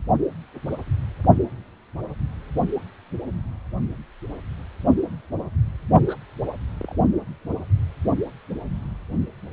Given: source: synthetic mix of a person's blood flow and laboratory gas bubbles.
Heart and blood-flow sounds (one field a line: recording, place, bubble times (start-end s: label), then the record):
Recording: Doppler ultrasound of blood flow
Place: precordium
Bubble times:
0.70-0.77 s: bubbles
6.06-6.14 s: bubbles
6.81-6.96 s: bubbles
From the record:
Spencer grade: 2 (many but less than half of the cardiac periods contain bubble signals, singularly or in groups)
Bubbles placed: only in the low amplitude regions of the cardiac cycle